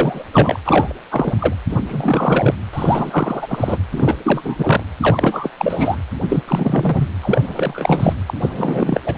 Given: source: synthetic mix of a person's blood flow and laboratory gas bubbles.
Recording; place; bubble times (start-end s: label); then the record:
Doppler ultrasound of blood flow; precordium
0.00-0.24 s: bubbles
0.33-0.58 s: bubbles
0.65-0.95 s: bubbles
1.10-1.33 s: bubbles
1.39-1.54 s: bubbles
1.67-2.55 s: bubbles
2.73-3.78 s: bubbles
3.92-4.18 s: bubbles
4.24-4.83 s: bubbles
5.00-5.50 s: bubbles
5.58-5.96 s: bubbles
6.29-6.42 s: bubbles
6.47-7.08 s: bubbles
7.21-8.13 s: bubbles
8.26-8.34 s: bubbles
8.40-9.00 s: bubbles
9.04-9.18 s: bubbles
From the record:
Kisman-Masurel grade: 343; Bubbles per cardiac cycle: rolling drumbeat, 9 or more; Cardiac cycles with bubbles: 100%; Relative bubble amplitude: loud (0.450 to 0.775); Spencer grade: 3 (all of the cardiac periods contain showers or single bubble signals, but not dominating or overriding the cardiac motion signals); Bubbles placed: anywhere in the cardiac cycle